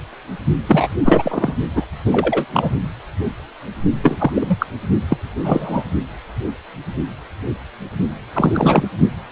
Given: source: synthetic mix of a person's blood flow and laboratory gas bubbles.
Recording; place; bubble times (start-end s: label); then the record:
Doppler ultrasound of blood flow; precordium
0.67-0.88 s: bubbles
1.05-1.55 s: bubbles
1.76-1.85 s: bubbles
2.04-2.46 s: bubbles
2.53-2.70 s: bubbles
4.03-4.31 s: bubbles
4.34-4.66 s: bubbles
5.08-5.17 s: bubbles
5.44-5.83 s: bubbles
8.33-8.86 s: bubbles
From the record:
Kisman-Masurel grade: 233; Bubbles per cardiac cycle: several, 3 to 8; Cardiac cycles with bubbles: 50 to 99%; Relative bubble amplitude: loud (0.450 to 0.775); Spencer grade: 3 (all of the cardiac periods contain showers or single bubble signals, but not dominating or overriding the cardiac motion signals); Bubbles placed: only in the low amplitude regions of the cardiac cycle